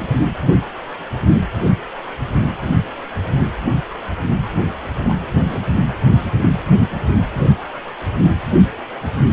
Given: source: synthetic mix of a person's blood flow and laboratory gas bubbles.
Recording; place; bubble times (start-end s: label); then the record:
Doppler ultrasound of blood flow; precordium
4.96-5.14 s: bubbles
5.42-5.72 s: bubbles
From the record:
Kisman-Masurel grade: 211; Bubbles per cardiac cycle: several, 3 to 8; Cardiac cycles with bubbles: 1 to 10%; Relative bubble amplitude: barely perceptible (0.100 to 0.250); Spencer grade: 1 (occasional bubble signal discernible with the cardiac motion signal, with majority of cardiac periods free of bubbles); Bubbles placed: anywhere in the cardiac cycle